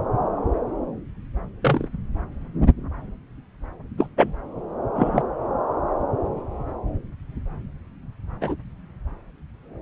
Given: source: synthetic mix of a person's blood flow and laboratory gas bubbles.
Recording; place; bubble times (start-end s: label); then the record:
Doppler ultrasound of blood flow; subclavian vein
1.61-1.88 s: bubbles
3.98-4.07 s: bubbles
4.17-4.33 s: bubbles
4.95-5.23 s: bubbles
8.41-8.56 s: bubbles
From the record:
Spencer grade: 2 (many but less than half of the cardiac periods contain bubble signals, singularly or in groups); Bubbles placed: anywhere in the cardiac cycle